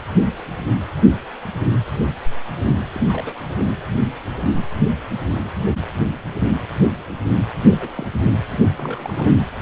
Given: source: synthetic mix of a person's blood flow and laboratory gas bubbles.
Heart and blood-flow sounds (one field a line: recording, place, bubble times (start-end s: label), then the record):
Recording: Doppler ultrasound of blood flow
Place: precordium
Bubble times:
2.94-3.06 s: bubbles
3.09-3.35 s: bubbles
3.59-3.65 s: bubbles
7.68-8.06 s: bubbles
8.78-9.35 s: bubbles
From the record:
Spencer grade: 2 (many but less than half of the cardiac periods contain bubble signals, singularly or in groups)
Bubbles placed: anywhere in the cardiac cycle